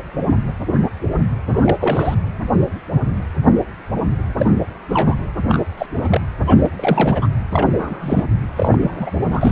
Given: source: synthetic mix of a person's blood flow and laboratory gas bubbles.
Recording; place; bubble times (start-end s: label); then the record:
Doppler ultrasound of blood flow; precordium
1.47-1.77 s: bubbles
1.80-2.15 s: bubbles
4.38-4.51 s: bubbles
4.89-5.15 s: bubbles
5.49-5.60 s: bubbles
5.78-5.86 s: bubbles
5.97-6.21 s: bubbles
6.46-6.68 s: bubbles
6.76-7.27 s: bubbles
7.51-7.68 s: bubbles
7.79-8.24 s: bubbles
8.56-8.78 s: bubbles
8.82-9.11 s: bubbles
9.30-9.52 s: bubbles
From the record:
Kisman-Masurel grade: 232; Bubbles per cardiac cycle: several, 3 to 8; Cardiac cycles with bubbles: 50 to 99%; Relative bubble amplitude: moderate (0.250 to 0.450); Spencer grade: 3 (all of the cardiac periods contain showers or single bubble signals, but not dominating or overriding the cardiac motion signals); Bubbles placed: anywhere in the cardiac cycle